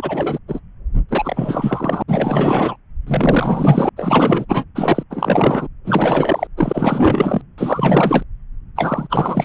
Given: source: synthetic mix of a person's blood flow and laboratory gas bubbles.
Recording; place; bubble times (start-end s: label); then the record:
Doppler ultrasound of blood flow; subclavian vein
0.00-0.39 s: bubbles
0.48-0.60 s: bubbles
1.09-2.03 s: bubbles
2.08-2.76 s: bubbles
3.07-3.90 s: bubbles
3.96-4.45 s: bubbles
4.49-4.65 s: bubbles
4.75-5.03 s: bubbles
5.10-5.67 s: bubbles
5.84-6.47 s: bubbles
6.57-7.42 s: bubbles
7.58-8.22 s: bubbles
8.76-9.45 s: bubbles
From the record:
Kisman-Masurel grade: 444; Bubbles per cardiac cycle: continuous sound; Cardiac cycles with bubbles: 100%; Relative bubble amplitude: maximal (0.775 to 0.999); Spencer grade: 4 (maximum detectable bubble signal sounding continuously throughout systole and diastole of every cardiac period, and overriding the amplitude of the normal cardiac signals); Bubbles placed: anywhere in the cardiac cycle